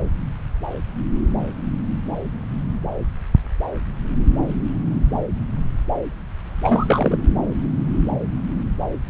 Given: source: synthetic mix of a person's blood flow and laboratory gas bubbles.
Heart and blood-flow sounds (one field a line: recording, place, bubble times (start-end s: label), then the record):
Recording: Doppler ultrasound of blood flow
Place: subclavian vein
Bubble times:
6.63-7.18 s: bubbles
From the record:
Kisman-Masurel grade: 212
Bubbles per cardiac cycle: several, 3 to 8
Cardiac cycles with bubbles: 1 to 10%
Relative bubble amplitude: moderate (0.250 to 0.450)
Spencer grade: 1 (occasional bubble signal discernible with the cardiac motion signal, with majority of cardiac periods free of bubbles)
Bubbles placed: anywhere in the cardiac cycle